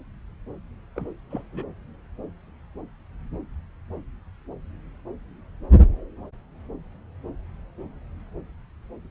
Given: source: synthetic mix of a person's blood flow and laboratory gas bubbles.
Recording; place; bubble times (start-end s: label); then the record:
Doppler ultrasound of blood flow; subclavian vein
0.96-1.05 s: bubbles
1.31-1.43 s: bubbles
1.52-1.64 s: bubbles
From the record:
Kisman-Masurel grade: 211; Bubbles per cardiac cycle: several, 3 to 8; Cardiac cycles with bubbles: 1 to 10%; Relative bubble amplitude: barely perceptible (0.100 to 0.250); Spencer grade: 1 (occasional bubble signal discernible with the cardiac motion signal, with majority of cardiac periods free of bubbles); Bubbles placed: anywhere in the cardiac cycle